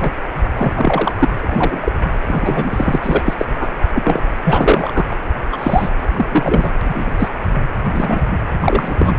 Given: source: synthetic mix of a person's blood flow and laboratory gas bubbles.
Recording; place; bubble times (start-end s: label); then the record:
Doppler ultrasound of blood flow; precordium
0.00-0.12 s: bubbles
0.56-1.14 s: bubbles
1.19-1.28 s: bubbles
1.41-1.92 s: bubbles
2.27-2.99 s: bubbles
3.02-3.22 s: bubbles
3.25-3.34 s: bubbles
3.38-3.46 s: bubbles
3.60-3.68 s: bubbles
3.94-4.22 s: bubbles
4.44-5.07 s: bubbles
5.52-5.89 s: bubbles
5.99-6.70 s: bubbles
6.85-7.14 s: bubbles
7.18-7.30 s: bubbles
7.92-8.21 s: bubbles
8.61-9.13 s: bubbles
From the record:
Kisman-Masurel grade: 243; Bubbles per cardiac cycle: several, 3 to 8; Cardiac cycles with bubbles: 100%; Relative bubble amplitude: loud (0.450 to 0.775); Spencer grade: 3 (all of the cardiac periods contain showers or single bubble signals, but not dominating or overriding the cardiac motion signals); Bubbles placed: anywhere in the cardiac cycle